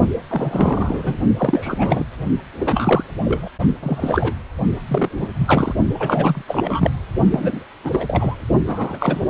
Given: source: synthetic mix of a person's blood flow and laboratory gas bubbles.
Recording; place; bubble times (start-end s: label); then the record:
Doppler ultrasound of blood flow; precordium
0.29-1.18 s: bubbles
1.37-2.04 s: bubbles
2.54-3.03 s: bubbles
3.24-3.48 s: bubbles
3.83-4.34 s: bubbles
4.88-5.29 s: bubbles
5.47-5.74 s: bubbles
5.99-6.42 s: bubbles
6.48-6.91 s: bubbles
7.30-7.64 s: bubbles
7.84-8.35 s: bubbles
8.67-9.21 s: bubbles
From the record:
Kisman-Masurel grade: 342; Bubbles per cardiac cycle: rolling drumbeat, 9 or more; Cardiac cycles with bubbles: 100%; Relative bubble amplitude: moderate (0.250 to 0.450); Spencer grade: 3 (all of the cardiac periods contain showers or single bubble signals, but not dominating or overriding the cardiac motion signals); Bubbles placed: only in the low amplitude regions of the cardiac cycle